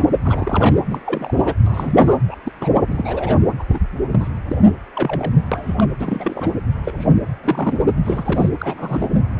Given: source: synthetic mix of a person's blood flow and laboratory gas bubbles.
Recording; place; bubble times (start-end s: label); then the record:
Doppler ultrasound of blood flow; precordium
0.00-0.07 s: bubbles
0.23-0.81 s: bubbles
0.91-1.00 s: bubbles
1.06-1.55 s: bubbles
1.66-2.18 s: bubbles
2.27-2.36 s: bubbles
2.44-2.52 s: bubbles
2.60-2.69 s: bubbles
2.87-3.35 s: bubbles
3.59-3.65 s: bubbles
3.72-3.79 s: bubbles
4.11-4.28 s: bubbles
4.49-4.55 s: bubbles
4.95-5.32 s: bubbles
5.51-5.74 s: bubbles
5.77-5.83 s: bubbles
5.98-6.52 s: bubbles
6.83-6.92 s: bubbles
6.97-7.05 s: bubbles
7.43-7.76 s: bubbles
8.04-8.50 s: bubbles
8.60-9.08 s: bubbles
From the record:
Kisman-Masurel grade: 242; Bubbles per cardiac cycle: several, 3 to 8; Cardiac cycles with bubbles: 100%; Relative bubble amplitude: moderate (0.250 to 0.450); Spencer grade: 3 (all of the cardiac periods contain showers or single bubble signals, but not dominating or overriding the cardiac motion signals); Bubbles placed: anywhere in the cardiac cycle